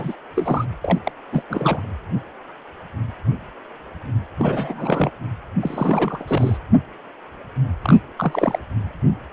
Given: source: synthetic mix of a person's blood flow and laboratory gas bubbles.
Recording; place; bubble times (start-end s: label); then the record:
Doppler ultrasound of blood flow; precordium
0.00-0.15 s: bubbles
0.36-0.65 s: bubbles
0.81-0.99 s: bubbles
1.04-1.11 s: bubbles
1.32-1.43 s: bubbles
1.50-1.86 s: bubbles
4.39-5.11 s: bubbles
5.62-6.23 s: bubbles
6.27-6.58 s: bubbles
7.82-8.00 s: bubbles
8.17-8.59 s: bubbles
From the record:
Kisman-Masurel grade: 332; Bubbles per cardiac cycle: rolling drumbeat, 9 or more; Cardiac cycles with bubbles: 50 to 99%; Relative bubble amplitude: moderate (0.250 to 0.450); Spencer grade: 3 (all of the cardiac periods contain showers or single bubble signals, but not dominating or overriding the cardiac motion signals); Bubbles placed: anywhere in the cardiac cycle